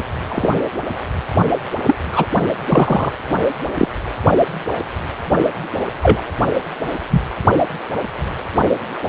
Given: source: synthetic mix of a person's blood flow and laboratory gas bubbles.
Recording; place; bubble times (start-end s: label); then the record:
Doppler ultrasound of blood flow; precordium
0.29-0.50 s: bubbles
1.86-1.96 s: bubbles
2.12-2.25 s: bubbles
2.69-3.12 s: bubbles
3.78-3.88 s: bubbles
6.02-6.21 s: bubbles
7.09-7.22 s: bubbles
From the record:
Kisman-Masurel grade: 123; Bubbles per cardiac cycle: 1 to 2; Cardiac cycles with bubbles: 10 to 50%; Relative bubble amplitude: loud (0.450 to 0.775); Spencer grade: 2 (many but less than half of the cardiac periods contain bubble signals, singularly or in groups); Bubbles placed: only in the low amplitude regions of the cardiac cycle